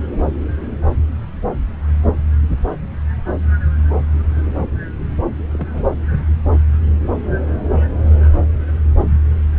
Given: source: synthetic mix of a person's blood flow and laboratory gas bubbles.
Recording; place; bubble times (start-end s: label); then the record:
Doppler ultrasound of blood flow; subclavian vein
5.52-5.86 s: bubbles
From the record:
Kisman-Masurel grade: 112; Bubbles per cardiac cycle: 1 to 2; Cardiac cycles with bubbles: 1 to 10%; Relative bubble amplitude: moderate (0.250 to 0.450); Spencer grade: 1 (occasional bubble signal discernible with the cardiac motion signal, with majority of cardiac periods free of bubbles); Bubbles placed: anywhere in the cardiac cycle